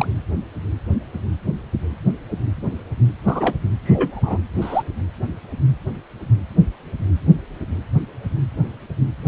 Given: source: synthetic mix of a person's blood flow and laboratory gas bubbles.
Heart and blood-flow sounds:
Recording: Doppler ultrasound of blood flow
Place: precordium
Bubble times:
0.00-0.06 s: bubbles
3.26-3.56 s: bubbles
3.83-4.38 s: bubbles
4.60-4.83 s: bubbles
From the record:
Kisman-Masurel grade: 123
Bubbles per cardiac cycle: 1 to 2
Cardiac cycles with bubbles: 10 to 50%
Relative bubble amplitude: loud (0.450 to 0.775)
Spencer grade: 2 (many but less than half of the cardiac periods contain bubble signals, singularly or in groups)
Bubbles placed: anywhere in the cardiac cycle

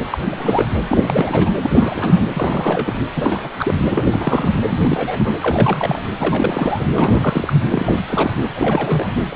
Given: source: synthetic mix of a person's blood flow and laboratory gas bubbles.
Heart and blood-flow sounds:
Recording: Doppler ultrasound of blood flow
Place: precordium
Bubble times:
0.11-0.18 s: bubbles
0.23-0.68 s: bubbles
0.88-1.51 s: bubbles
1.61-2.26 s: bubbles
2.33-2.99 s: bubbles
3.16-3.51 s: bubbles
3.58-3.74 s: bubbles
3.90-4.52 s: bubbles
4.67-4.80 s: bubbles
4.85-5.37 s: bubbles
5.41-6.02 s: bubbles
6.19-6.85 s: bubbles
6.94-7.62 s: bubbles
7.71-8.02 s: bubbles
8.08-8.31 s: bubbles
8.55-9.12 s: bubbles
9.30-9.36 s: bubbles
From the record:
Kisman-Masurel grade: 342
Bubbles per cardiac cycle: rolling drumbeat, 9 or more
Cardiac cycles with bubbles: 100%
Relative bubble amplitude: moderate (0.250 to 0.450)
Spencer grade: 3 (all of the cardiac periods contain showers or single bubble signals, but not dominating or overriding the cardiac motion signals)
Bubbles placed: anywhere in the cardiac cycle

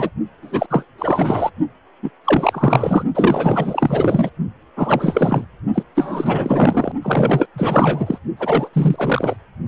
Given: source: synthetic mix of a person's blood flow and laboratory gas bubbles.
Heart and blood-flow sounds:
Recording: Doppler ultrasound of blood flow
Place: precordium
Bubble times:
0.00-0.10 s: bubbles
0.42-0.66 s: bubbles
0.69-0.86 s: bubbles
0.98-1.50 s: bubbles
2.02-2.10 s: bubbles
2.25-3.04 s: bubbles
3.15-4.31 s: bubbles
4.76-5.45 s: bubbles
5.74-5.83 s: bubbles
5.95-6.92 s: bubbles
7.03-7.46 s: bubbles
7.54-8.18 s: bubbles
8.36-8.69 s: bubbles
8.72-9.36 s: bubbles
From the record:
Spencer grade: 4 (maximum detectable bubble signal sounding continuously throughout systole and diastole of every cardiac period, and overriding the amplitude of the normal cardiac signals)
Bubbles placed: only in the low amplitude regions of the cardiac cycle

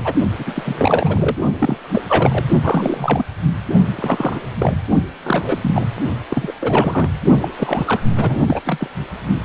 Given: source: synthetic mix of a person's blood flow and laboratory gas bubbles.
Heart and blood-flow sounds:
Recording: Doppler ultrasound of blood flow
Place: precordium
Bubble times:
0.00-0.12 s: bubbles
0.39-1.37 s: bubbles
1.58-1.78 s: bubbles
1.92-2.04 s: bubbles
2.07-2.44 s: bubbles
2.63-3.23 s: bubbles
3.96-4.39 s: bubbles
4.58-4.76 s: bubbles
5.22-5.58 s: bubbles
5.62-5.84 s: bubbles
6.30-6.53 s: bubbles
6.60-7.09 s: bubbles
7.42-7.48 s: bubbles
7.58-8.02 s: bubbles
8.08-8.61 s: bubbles
8.66-8.88 s: bubbles
From the record:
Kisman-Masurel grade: 342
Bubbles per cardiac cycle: rolling drumbeat, 9 or more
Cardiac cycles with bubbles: 100%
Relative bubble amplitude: moderate (0.250 to 0.450)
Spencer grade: 3 (all of the cardiac periods contain showers or single bubble signals, but not dominating or overriding the cardiac motion signals)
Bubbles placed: only in the low amplitude regions of the cardiac cycle

